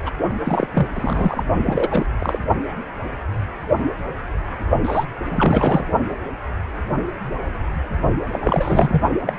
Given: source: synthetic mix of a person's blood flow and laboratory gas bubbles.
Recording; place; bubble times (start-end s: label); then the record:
Doppler ultrasound of blood flow; precordium
0.05-0.10 s: bubbles
0.45-0.67 s: bubbles
0.74-0.87 s: bubbles
0.95-1.44 s: bubbles
1.66-2.06 s: bubbles
2.19-2.39 s: bubbles
4.84-5.05 s: bubbles
5.29-5.86 s: bubbles
8.32-9.01 s: bubbles
9.27-9.33 s: bubbles
From the record:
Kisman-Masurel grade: 333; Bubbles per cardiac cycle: rolling drumbeat, 9 or more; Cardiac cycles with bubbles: 50 to 99%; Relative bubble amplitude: loud (0.450 to 0.775); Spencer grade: 3 (all of the cardiac periods contain showers or single bubble signals, but not dominating or overriding the cardiac motion signals); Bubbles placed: only in the low amplitude regions of the cardiac cycle